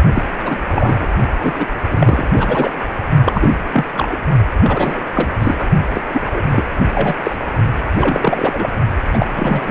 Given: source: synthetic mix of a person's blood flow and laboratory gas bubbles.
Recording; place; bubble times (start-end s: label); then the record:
Doppler ultrasound of blood flow; precordium
0.14-0.22 s: bubbles
0.37-0.57 s: bubbles
0.71-1.08 s: bubbles
1.43-1.65 s: bubbles
1.90-2.27 s: bubbles
2.31-2.72 s: bubbles
3.25-3.54 s: bubbles
3.72-3.85 s: bubbles
3.97-4.08 s: bubbles
4.11-4.17 s: bubbles
4.62-5.03 s: bubbles
5.14-5.29 s: bubbles
5.40-5.55 s: bubbles
5.59-5.68 s: bubbles
5.94-6.02 s: bubbles
6.13-6.65 s: bubbles
6.93-7.17 s: bubbles
7.23-7.36 s: bubbles
7.96-8.70 s: bubbles
9.13-9.26 s: bubbles
9.36-9.71 s: bubbles
From the record:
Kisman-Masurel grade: 343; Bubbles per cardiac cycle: rolling drumbeat, 9 or more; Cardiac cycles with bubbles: 100%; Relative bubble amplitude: loud (0.450 to 0.775); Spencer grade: 3 (all of the cardiac periods contain showers or single bubble signals, but not dominating or overriding the cardiac motion signals); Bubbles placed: only in the low amplitude regions of the cardiac cycle